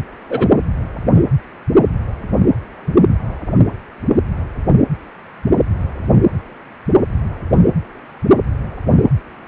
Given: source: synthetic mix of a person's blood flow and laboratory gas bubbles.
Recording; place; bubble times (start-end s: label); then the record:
Doppler ultrasound of blood flow; precordium
0.29-0.48 s: bubbles
1.16-1.22 s: bubbles
From the record:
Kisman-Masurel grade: 123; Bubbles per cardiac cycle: 1 to 2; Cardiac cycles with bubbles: 10 to 50%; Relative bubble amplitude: loud (0.450 to 0.775); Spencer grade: 2 (many but less than half of the cardiac periods contain bubble signals, singularly or in groups); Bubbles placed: anywhere in the cardiac cycle